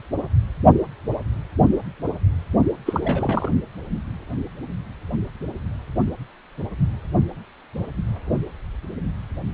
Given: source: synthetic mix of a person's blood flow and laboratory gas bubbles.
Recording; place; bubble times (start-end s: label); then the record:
Doppler ultrasound of blood flow; precordium
2.86-3.51 s: bubbles
From the record:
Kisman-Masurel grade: 212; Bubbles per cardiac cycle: several, 3 to 8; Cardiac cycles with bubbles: 1 to 10%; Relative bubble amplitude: moderate (0.250 to 0.450); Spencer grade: 1 (occasional bubble signal discernible with the cardiac motion signal, with majority of cardiac periods free of bubbles); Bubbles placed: only in the low amplitude regions of the cardiac cycle